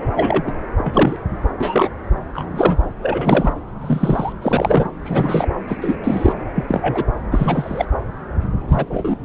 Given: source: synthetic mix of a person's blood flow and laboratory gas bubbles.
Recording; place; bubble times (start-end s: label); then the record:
Doppler ultrasound of blood flow; subclavian vein
0.16-0.43 s: bubbles
0.46-0.52 s: bubbles
0.78-1.17 s: bubbles
1.58-1.89 s: bubbles
2.34-2.77 s: bubbles
3.02-3.53 s: bubbles
3.81-4.33 s: bubbles
4.42-4.91 s: bubbles
5.04-5.48 s: bubbles
5.67-5.77 s: bubbles
5.81-5.96 s: bubbles
6.04-6.33 s: bubbles
6.54-6.65 s: bubbles
6.67-7.04 s: bubbles
7.31-7.85 s: bubbles
8.68-8.86 s: bubbles
8.90-9.16 s: bubbles
From the record:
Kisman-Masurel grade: 243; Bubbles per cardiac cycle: several, 3 to 8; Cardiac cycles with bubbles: 100%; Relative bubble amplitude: loud (0.450 to 0.775); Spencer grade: 3 (all of the cardiac periods contain showers or single bubble signals, but not dominating or overriding the cardiac motion signals); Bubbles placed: anywhere in the cardiac cycle